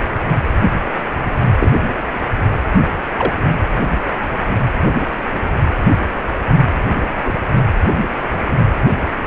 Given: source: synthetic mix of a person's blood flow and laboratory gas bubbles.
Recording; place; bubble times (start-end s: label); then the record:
Doppler ultrasound of blood flow; precordium
1.58-1.71 s: bubbles
3.17-3.33 s: bubbles
4.84-4.92 s: bubbles
7.24-7.37 s: bubbles
From the record:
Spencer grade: 2 (many but less than half of the cardiac periods contain bubble signals, singularly or in groups); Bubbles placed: anywhere in the cardiac cycle